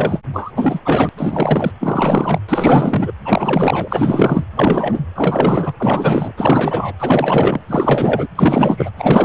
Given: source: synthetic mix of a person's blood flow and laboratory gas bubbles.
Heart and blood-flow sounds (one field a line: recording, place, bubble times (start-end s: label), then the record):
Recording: Doppler ultrasound of blood flow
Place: precordium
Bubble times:
0.00-0.18 s: bubbles
0.32-0.52 s: bubbles
0.56-0.81 s: bubbles
0.85-1.09 s: bubbles
1.17-1.72 s: bubbles
1.80-2.39 s: bubbles
2.48-3.11 s: bubbles
3.21-4.45 s: bubbles
4.56-5.00 s: bubbles
5.15-5.74 s: bubbles
5.79-6.32 s: bubbles
6.37-6.93 s: bubbles
7.00-7.60 s: bubbles
7.67-8.27 s: bubbles
8.35-8.90 s: bubbles
8.96-9.25 s: bubbles
From the record:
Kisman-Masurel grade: 444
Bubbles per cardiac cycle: continuous sound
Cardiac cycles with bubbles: 100%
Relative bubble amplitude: maximal (0.775 to 0.999)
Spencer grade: 4 (maximum detectable bubble signal sounding continuously throughout systole and diastole of every cardiac period, and overriding the amplitude of the normal cardiac signals)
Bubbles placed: anywhere in the cardiac cycle